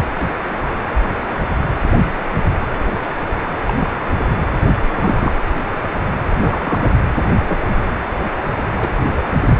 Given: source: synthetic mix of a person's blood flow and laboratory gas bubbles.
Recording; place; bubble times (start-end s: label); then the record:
Doppler ultrasound of blood flow; precordium
3.67-3.73 s: bubbles
3.80-3.88 s: bubbles
4.90-5.32 s: bubbles
6.39-6.90 s: bubbles
7.49-7.57 s: bubbles
8.77-8.88 s: bubbles
8.97-9.24 s: bubbles
From the record:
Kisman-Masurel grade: 122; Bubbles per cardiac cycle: 1 to 2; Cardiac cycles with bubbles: 10 to 50%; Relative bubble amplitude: moderate (0.250 to 0.450); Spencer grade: 2 (many but less than half of the cardiac periods contain bubble signals, singularly or in groups); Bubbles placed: anywhere in the cardiac cycle